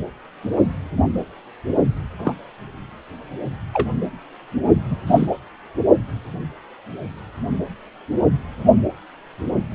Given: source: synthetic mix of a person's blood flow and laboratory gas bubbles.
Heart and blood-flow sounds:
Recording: Doppler ultrasound of blood flow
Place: precordium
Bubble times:
2.19-2.34 s: bubbles
3.73-3.88 s: bubbles
4.90-4.96 s: bubbles
5.07-5.27 s: bubbles
From the record:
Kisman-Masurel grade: 122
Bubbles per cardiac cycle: 1 to 2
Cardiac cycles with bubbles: 10 to 50%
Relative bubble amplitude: moderate (0.250 to 0.450)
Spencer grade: 2 (many but less than half of the cardiac periods contain bubble signals, singularly or in groups)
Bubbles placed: only in the low amplitude regions of the cardiac cycle

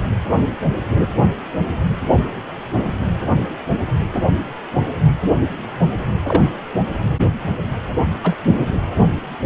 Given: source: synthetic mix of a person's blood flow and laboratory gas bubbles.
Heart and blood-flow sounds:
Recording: Doppler ultrasound of blood flow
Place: precordium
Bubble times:
6.22-6.49 s: bubbles
8.23-8.36 s: bubbles
From the record:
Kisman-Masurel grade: 122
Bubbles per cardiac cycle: 1 to 2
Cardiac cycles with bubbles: 10 to 50%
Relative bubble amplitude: moderate (0.250 to 0.450)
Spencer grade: 2 (many but less than half of the cardiac periods contain bubble signals, singularly or in groups)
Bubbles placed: anywhere in the cardiac cycle

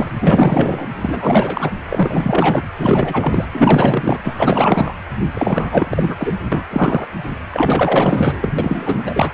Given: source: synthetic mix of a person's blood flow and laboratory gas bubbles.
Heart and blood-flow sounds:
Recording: Doppler ultrasound of blood flow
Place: precordium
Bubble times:
0.00-0.12 s: bubbles
0.19-0.86 s: bubbles
1.02-1.70 s: bubbles
1.90-2.62 s: bubbles
2.79-3.46 s: bubbles
3.52-4.20 s: bubbles
4.24-4.94 s: bubbles
5.34-6.33 s: bubbles
6.52-6.67 s: bubbles
6.70-7.07 s: bubbles
7.50-8.51 s: bubbles
8.58-9.32 s: bubbles
From the record:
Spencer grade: 4 (maximum detectable bubble signal sounding continuously throughout systole and diastole of every cardiac period, and overriding the amplitude of the normal cardiac signals)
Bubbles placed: anywhere in the cardiac cycle

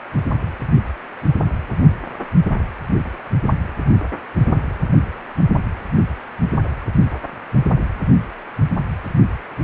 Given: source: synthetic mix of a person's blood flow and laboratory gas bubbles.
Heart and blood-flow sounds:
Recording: Doppler ultrasound of blood flow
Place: precordium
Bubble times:
no bubbles
From the record:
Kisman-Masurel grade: 000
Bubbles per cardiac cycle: 0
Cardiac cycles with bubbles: 0%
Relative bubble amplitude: no bubbles discernible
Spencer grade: 0 (complete lack of bubble signals)

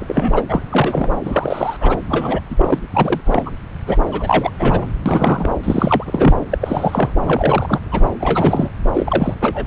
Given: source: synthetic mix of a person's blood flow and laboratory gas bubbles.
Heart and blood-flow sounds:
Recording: Doppler ultrasound of blood flow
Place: subclavian vein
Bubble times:
0.00-0.43 s: bubbles
0.48-0.62 s: bubbles
0.71-1.10 s: bubbles
1.24-1.77 s: bubbles
1.80-2.00 s: bubbles
2.09-2.40 s: bubbles
2.50-2.55 s: bubbles
2.58-2.79 s: bubbles
2.92-3.21 s: bubbles
3.25-3.43 s: bubbles
3.46-3.51 s: bubbles
3.86-4.01 s: bubbles
4.11-4.50 s: bubbles
4.58-4.90 s: bubbles
5.05-5.53 s: bubbles
5.63-6.34 s: bubbles
6.51-6.58 s: bubbles
6.61-7.10 s: bubbles
7.25-7.79 s: bubbles
7.91-8.04 s: bubbles
8.20-8.70 s: bubbles
8.93-9.34 s: bubbles
9.41-9.67 s: bubbles
From the record:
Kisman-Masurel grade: 332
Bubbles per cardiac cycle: rolling drumbeat, 9 or more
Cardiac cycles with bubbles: 50 to 99%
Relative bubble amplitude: moderate (0.250 to 0.450)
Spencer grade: 3 (all of the cardiac periods contain showers or single bubble signals, but not dominating or overriding the cardiac motion signals)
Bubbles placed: anywhere in the cardiac cycle

